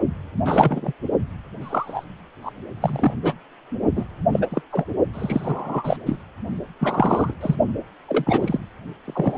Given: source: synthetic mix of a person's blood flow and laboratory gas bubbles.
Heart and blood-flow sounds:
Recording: Doppler ultrasound of blood flow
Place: precordium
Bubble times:
0.44-0.93 s: bubbles
1.61-2.04 s: bubbles
2.42-2.51 s: bubbles
2.80-3.14 s: bubbles
3.24-3.34 s: bubbles
3.95-4.05 s: bubbles
4.32-4.47 s: bubbles
4.50-4.62 s: bubbles
4.71-4.87 s: bubbles
5.14-5.96 s: bubbles
6.06-6.20 s: bubbles
6.79-7.34 s: bubbles
7.41-7.56 s: bubbles
8.08-8.59 s: bubbles
9.04-9.38 s: bubbles
From the record:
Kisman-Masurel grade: 243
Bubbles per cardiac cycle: several, 3 to 8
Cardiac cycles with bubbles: 100%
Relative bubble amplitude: loud (0.450 to 0.775)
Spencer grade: 3 (all of the cardiac periods contain showers or single bubble signals, but not dominating or overriding the cardiac motion signals)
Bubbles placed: only in the low amplitude regions of the cardiac cycle

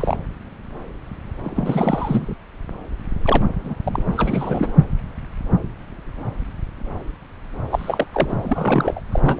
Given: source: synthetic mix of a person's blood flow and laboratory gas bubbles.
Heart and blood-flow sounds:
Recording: Doppler ultrasound of blood flow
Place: subclavian vein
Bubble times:
0.00-0.17 s: bubbles
1.44-2.35 s: bubbles
3.23-3.46 s: bubbles
3.65-3.74 s: bubbles
3.86-4.08 s: bubbles
4.12-4.72 s: bubbles
7.70-8.05 s: bubbles
8.12-8.36 s: bubbles
8.39-9.00 s: bubbles
9.12-9.20 s: bubbles
9.24-9.40 s: bubbles
From the record:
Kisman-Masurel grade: 332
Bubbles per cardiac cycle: rolling drumbeat, 9 or more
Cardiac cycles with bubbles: 50 to 99%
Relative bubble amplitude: moderate (0.250 to 0.450)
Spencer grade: 3 (all of the cardiac periods contain showers or single bubble signals, but not dominating or overriding the cardiac motion signals)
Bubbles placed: anywhere in the cardiac cycle

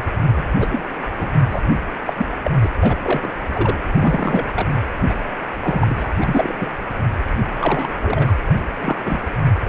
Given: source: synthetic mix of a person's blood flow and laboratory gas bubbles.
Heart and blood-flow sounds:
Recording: Doppler ultrasound of blood flow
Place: precordium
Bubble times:
0.00-0.05 s: bubbles
0.35-0.43 s: bubbles
0.59-0.81 s: bubbles
1.19-1.29 s: bubbles
1.49-1.61 s: bubbles
2.06-2.14 s: bubbles
2.17-2.26 s: bubbles
2.45-2.51 s: bubbles
2.62-2.70 s: bubbles
2.81-2.96 s: bubbles
3.02-3.34 s: bubbles
3.53-3.76 s: bubbles
3.95-4.47 s: bubbles
4.54-4.67 s: bubbles
5.09-5.14 s: bubbles
5.62-5.95 s: bubbles
5.97-6.11 s: bubbles
6.21-6.55 s: bubbles
6.58-6.69 s: bubbles
7.53-7.97 s: bubbles
8.02-8.35 s: bubbles
8.81-8.97 s: bubbles
9.05-9.21 s: bubbles
9.67-9.69 s: bubbles
From the record:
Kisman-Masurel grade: 242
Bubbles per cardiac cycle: several, 3 to 8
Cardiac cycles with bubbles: 100%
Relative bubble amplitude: moderate (0.250 to 0.450)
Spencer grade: 3 (all of the cardiac periods contain showers or single bubble signals, but not dominating or overriding the cardiac motion signals)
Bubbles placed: anywhere in the cardiac cycle

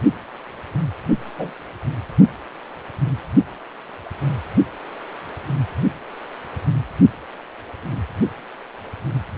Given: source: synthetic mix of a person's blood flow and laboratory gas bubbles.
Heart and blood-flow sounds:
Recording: Doppler ultrasound of blood flow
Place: precordium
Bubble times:
1.38-1.52 s: bubbles
From the record:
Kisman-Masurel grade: 112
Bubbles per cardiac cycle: 1 to 2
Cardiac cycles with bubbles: 1 to 10%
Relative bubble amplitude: moderate (0.250 to 0.450)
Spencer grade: 1 (occasional bubble signal discernible with the cardiac motion signal, with majority of cardiac periods free of bubbles)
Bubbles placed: anywhere in the cardiac cycle

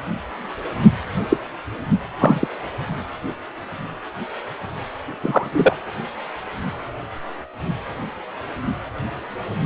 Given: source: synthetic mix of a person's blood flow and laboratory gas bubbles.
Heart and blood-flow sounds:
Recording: Doppler ultrasound of blood flow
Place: precordium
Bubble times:
1.29-1.40 s: bubbles
2.18-2.47 s: bubbles
5.21-5.49 s: bubbles
5.52-5.77 s: bubbles
From the record:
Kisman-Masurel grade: 123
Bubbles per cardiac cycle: 1 to 2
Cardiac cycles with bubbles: 10 to 50%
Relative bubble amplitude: loud (0.450 to 0.775)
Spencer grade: 2 (many but less than half of the cardiac periods contain bubble signals, singularly or in groups)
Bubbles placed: anywhere in the cardiac cycle

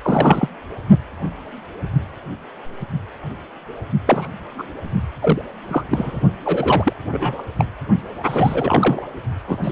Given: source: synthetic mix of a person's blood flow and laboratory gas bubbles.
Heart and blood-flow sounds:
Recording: Doppler ultrasound of blood flow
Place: precordium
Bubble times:
0.02-0.48 s: bubbles
4.06-4.28 s: bubbles
4.58-4.63 s: bubbles
5.21-5.42 s: bubbles
5.69-5.84 s: bubbles
5.91-6.21 s: bubbles
6.45-6.93 s: bubbles
7.11-7.44 s: bubbles
7.58-7.66 s: bubbles
8.24-9.01 s: bubbles
9.47-9.58 s: bubbles
9.63-9.72 s: bubbles
From the record:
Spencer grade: 3 (all of the cardiac periods contain showers or single bubble signals, but not dominating or overriding the cardiac motion signals)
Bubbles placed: only in the low amplitude regions of the cardiac cycle

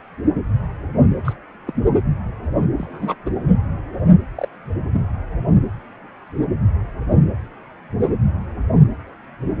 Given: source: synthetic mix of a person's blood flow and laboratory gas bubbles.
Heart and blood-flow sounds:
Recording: Doppler ultrasound of blood flow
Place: precordium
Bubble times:
1.24-1.33 s: bubbles
1.67-1.73 s: bubbles
2.78-3.15 s: bubbles
3.25-3.30 s: bubbles
4.36-4.48 s: bubbles
4.92-5.02 s: bubbles
8.00-8.09 s: bubbles
From the record:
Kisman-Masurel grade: 122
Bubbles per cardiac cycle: 1 to 2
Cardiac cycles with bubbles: 10 to 50%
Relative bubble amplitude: moderate (0.250 to 0.450)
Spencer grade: 2 (many but less than half of the cardiac periods contain bubble signals, singularly or in groups)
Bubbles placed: anywhere in the cardiac cycle

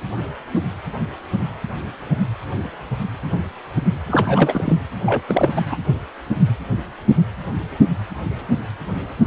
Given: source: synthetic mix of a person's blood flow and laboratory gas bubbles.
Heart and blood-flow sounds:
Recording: Doppler ultrasound of blood flow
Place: precordium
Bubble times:
4.07-4.78 s: bubbles
5.06-5.21 s: bubbles
5.28-5.50 s: bubbles
5.55-5.62 s: bubbles
5.68-5.78 s: bubbles
From the record:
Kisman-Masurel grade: 212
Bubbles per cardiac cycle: several, 3 to 8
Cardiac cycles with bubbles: 1 to 10%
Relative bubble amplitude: moderate (0.250 to 0.450)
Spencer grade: 1 (occasional bubble signal discernible with the cardiac motion signal, with majority of cardiac periods free of bubbles)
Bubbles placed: anywhere in the cardiac cycle

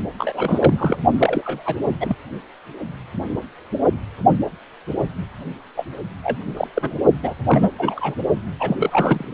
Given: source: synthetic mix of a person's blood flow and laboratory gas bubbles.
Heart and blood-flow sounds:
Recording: Doppler ultrasound of blood flow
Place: precordium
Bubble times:
0.18-0.96 s: bubbles
1.18-1.77 s: bubbles
2.00-2.16 s: bubbles
5.76-5.85 s: bubbles
6.23-6.38 s: bubbles
6.56-6.67 s: bubbles
6.74-6.96 s: bubbles
7.22-7.34 s: bubbles
7.49-7.71 s: bubbles
7.79-8.15 s: bubbles
8.59-8.76 s: bubbles
8.79-9.25 s: bubbles
From the record:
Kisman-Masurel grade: 232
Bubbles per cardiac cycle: several, 3 to 8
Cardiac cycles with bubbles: 50 to 99%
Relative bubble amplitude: moderate (0.250 to 0.450)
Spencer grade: 3 (all of the cardiac periods contain showers or single bubble signals, but not dominating or overriding the cardiac motion signals)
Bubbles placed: only in the low amplitude regions of the cardiac cycle

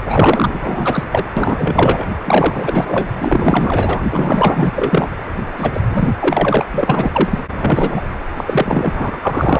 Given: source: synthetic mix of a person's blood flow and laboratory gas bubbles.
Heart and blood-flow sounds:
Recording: Doppler ultrasound of blood flow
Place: precordium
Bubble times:
0.08-1.04 s: bubbles
1.11-1.32 s: bubbles
1.36-2.06 s: bubbles
2.25-3.10 s: bubbles
3.19-4.01 s: bubbles
4.11-4.72 s: bubbles
4.75-5.09 s: bubbles
5.56-5.71 s: bubbles
5.73-5.80 s: bubbles
5.88-6.10 s: bubbles
6.21-6.65 s: bubbles
6.72-7.39 s: bubbles
7.50-8.02 s: bubbles
8.37-9.60 s: bubbles
From the record:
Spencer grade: 4 (maximum detectable bubble signal sounding continuously throughout systole and diastole of every cardiac period, and overriding the amplitude of the normal cardiac signals)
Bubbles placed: anywhere in the cardiac cycle

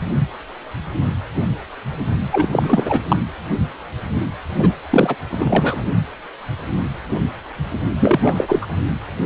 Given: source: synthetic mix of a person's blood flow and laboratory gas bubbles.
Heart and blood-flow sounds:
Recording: Doppler ultrasound of blood flow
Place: precordium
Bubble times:
2.31-3.01 s: bubbles
3.08-3.17 s: bubbles
4.56-4.76 s: bubbles
4.90-5.16 s: bubbles
5.29-5.83 s: bubbles
7.98-8.67 s: bubbles
From the record:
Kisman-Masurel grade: 333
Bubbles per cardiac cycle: rolling drumbeat, 9 or more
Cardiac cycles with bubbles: 50 to 99%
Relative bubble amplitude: loud (0.450 to 0.775)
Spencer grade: 3 (all of the cardiac periods contain showers or single bubble signals, but not dominating or overriding the cardiac motion signals)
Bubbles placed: anywhere in the cardiac cycle

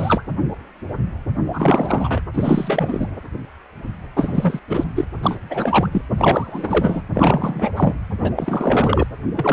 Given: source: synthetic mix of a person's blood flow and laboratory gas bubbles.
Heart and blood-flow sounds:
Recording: Doppler ultrasound of blood flow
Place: precordium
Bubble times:
0.00-0.23 s: bubbles
1.53-2.22 s: bubbles
2.34-3.08 s: bubbles
4.16-4.59 s: bubbles
4.69-4.84 s: bubbles
4.95-5.05 s: bubbles
5.23-5.38 s: bubbles
5.50-6.02 s: bubbles
6.17-7.03 s: bubbles
7.14-7.70 s: bubbles
7.76-7.95 s: bubbles
8.21-8.33 s: bubbles
8.36-9.06 s: bubbles
9.35-9.53 s: bubbles
From the record:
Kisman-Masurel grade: 333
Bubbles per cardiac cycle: rolling drumbeat, 9 or more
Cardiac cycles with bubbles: 50 to 99%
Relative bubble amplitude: loud (0.450 to 0.775)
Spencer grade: 3 (all of the cardiac periods contain showers or single bubble signals, but not dominating or overriding the cardiac motion signals)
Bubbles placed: anywhere in the cardiac cycle

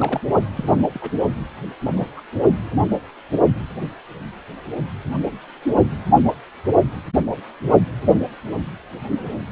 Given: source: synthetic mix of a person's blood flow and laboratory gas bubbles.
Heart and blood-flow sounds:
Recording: Doppler ultrasound of blood flow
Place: precordium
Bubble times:
0.00-0.21 s: bubbles
0.33-0.38 s: bubbles
0.56-0.87 s: bubbles
0.93-1.11 s: bubbles
1.85-1.93 s: bubbles
1.96-2.07 s: bubbles
2.16-2.23 s: bubbles
From the record:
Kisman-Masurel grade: 221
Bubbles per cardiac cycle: several, 3 to 8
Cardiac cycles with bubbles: 10 to 50%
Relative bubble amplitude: barely perceptible (0.100 to 0.250)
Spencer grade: 2 (many but less than half of the cardiac periods contain bubble signals, singularly or in groups)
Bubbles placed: only in the low amplitude regions of the cardiac cycle

